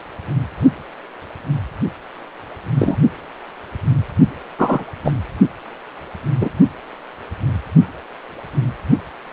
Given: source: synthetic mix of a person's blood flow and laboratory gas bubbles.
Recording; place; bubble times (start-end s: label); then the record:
Doppler ultrasound of blood flow; precordium
2.79-2.96 s: bubbles
4.58-4.84 s: bubbles
5.05-5.12 s: bubbles
6.41-6.50 s: bubbles
From the record:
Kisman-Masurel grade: 123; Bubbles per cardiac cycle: 1 to 2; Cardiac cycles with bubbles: 10 to 50%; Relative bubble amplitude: loud (0.450 to 0.775); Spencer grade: 2 (many but less than half of the cardiac periods contain bubble signals, singularly or in groups); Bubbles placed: only in the low amplitude regions of the cardiac cycle